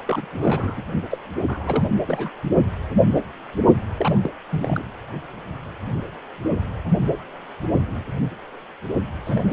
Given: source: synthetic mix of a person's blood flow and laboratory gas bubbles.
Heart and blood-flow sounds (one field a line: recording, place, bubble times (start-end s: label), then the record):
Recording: Doppler ultrasound of blood flow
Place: precordium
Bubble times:
0.06-0.25 s: bubbles
0.36-0.81 s: bubbles
1.09-1.18 s: bubbles
1.46-1.84 s: bubbles
2.02-2.31 s: bubbles
3.98-4.19 s: bubbles
4.22-4.30 s: bubbles
4.51-4.87 s: bubbles
9.24-9.53 s: bubbles
From the record:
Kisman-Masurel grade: 332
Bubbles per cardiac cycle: rolling drumbeat, 9 or more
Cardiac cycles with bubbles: 50 to 99%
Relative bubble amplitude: moderate (0.250 to 0.450)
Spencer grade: 3 (all of the cardiac periods contain showers or single bubble signals, but not dominating or overriding the cardiac motion signals)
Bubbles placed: only in the low amplitude regions of the cardiac cycle